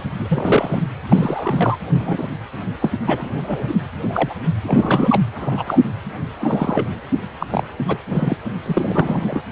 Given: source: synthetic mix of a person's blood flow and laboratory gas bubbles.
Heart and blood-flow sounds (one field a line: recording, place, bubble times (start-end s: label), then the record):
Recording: Doppler ultrasound of blood flow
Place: precordium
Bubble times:
0.00-0.02 s: bubbles
0.18-0.82 s: bubbles
1.09-1.78 s: bubbles
1.99-2.27 s: bubbles
2.81-2.91 s: bubbles
3.06-3.79 s: bubbles
4.01-4.34 s: bubbles
4.66-5.23 s: bubbles
5.35-5.80 s: bubbles
6.40-6.88 s: bubbles
7.40-7.46 s: bubbles
7.50-7.63 s: bubbles
7.88-7.98 s: bubbles
8.06-8.37 s: bubbles
8.65-9.43 s: bubbles
From the record:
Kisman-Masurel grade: 242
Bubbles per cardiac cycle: several, 3 to 8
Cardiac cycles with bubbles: 100%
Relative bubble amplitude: moderate (0.250 to 0.450)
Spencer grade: 3 (all of the cardiac periods contain showers or single bubble signals, but not dominating or overriding the cardiac motion signals)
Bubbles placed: anywhere in the cardiac cycle